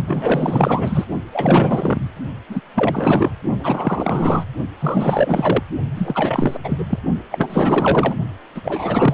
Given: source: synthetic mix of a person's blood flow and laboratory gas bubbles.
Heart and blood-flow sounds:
Doppler ultrasound of blood flow; precordium
0.07-1.05 s: bubbles
1.33-2.10 s: bubbles
2.48-2.60 s: bubbles
2.74-3.34 s: bubbles
3.59-4.45 s: bubbles
4.80-5.62 s: bubbles
5.95-6.58 s: bubbles
6.63-6.86 s: bubbles
6.89-6.99 s: bubbles
7.31-8.14 s: bubbles
8.54-9.14 s: bubbles
From the record:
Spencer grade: 4 (maximum detectable bubble signal sounding continuously throughout systole and diastole of every cardiac period, and overriding the amplitude of the normal cardiac signals); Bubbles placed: only in the low amplitude regions of the cardiac cycle

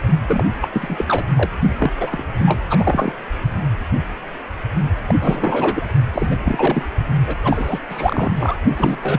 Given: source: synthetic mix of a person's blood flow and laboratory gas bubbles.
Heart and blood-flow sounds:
Doppler ultrasound of blood flow; precordium
0.27-0.45 s: bubbles
0.61-0.68 s: bubbles
0.72-1.23 s: bubbles
1.35-1.50 s: bubbles
1.79-1.92 s: bubbles
1.96-2.26 s: bubbles
2.38-2.60 s: bubbles
2.69-3.12 s: bubbles
5.08-5.15 s: bubbles
5.19-5.93 s: bubbles
6.12-6.36 s: bubbles
6.45-6.86 s: bubbles
7.27-7.35 s: bubbles
7.43-7.79 s: bubbles
7.89-8.31 s: bubbles
8.37-8.56 s: bubbles
8.77-8.98 s: bubbles
9.02-9.19 s: bubbles
From the record:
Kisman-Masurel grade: 333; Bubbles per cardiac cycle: rolling drumbeat, 9 or more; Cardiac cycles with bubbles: 50 to 99%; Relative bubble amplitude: loud (0.450 to 0.775); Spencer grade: 3 (all of the cardiac periods contain showers or single bubble signals, but not dominating or overriding the cardiac motion signals); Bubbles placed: only in the low amplitude regions of the cardiac cycle

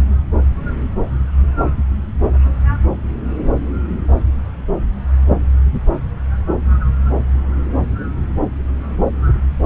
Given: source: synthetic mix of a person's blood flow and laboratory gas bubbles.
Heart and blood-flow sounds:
Doppler ultrasound of blood flow; subclavian vein
no bubbles
From the record:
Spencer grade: 0 (complete lack of bubble signals)

